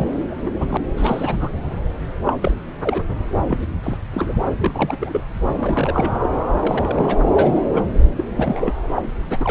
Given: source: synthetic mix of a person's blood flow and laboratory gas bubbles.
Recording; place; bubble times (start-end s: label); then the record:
Doppler ultrasound of blood flow; subclavian vein
0.00-0.35 s: bubbles
0.45-0.50 s: bubbles
0.58-0.77 s: bubbles
0.98-1.50 s: bubbles
2.21-2.36 s: bubbles
2.42-2.52 s: bubbles
2.82-3.04 s: bubbles
3.48-3.59 s: bubbles
3.83-3.97 s: bubbles
4.14-4.36 s: bubbles
4.58-5.25 s: bubbles
5.55-6.18 s: bubbles
6.21-6.29 s: bubbles
6.61-7.21 s: bubbles
7.36-7.62 s: bubbles
7.72-7.85 s: bubbles
8.17-8.24 s: bubbles
8.37-8.72 s: bubbles
8.96-9.03 s: bubbles
9.29-9.51 s: bubbles
From the record:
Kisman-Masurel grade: 242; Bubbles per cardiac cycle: several, 3 to 8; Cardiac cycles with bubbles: 100%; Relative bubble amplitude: moderate (0.250 to 0.450); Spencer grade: 3 (all of the cardiac periods contain showers or single bubble signals, but not dominating or overriding the cardiac motion signals); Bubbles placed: anywhere in the cardiac cycle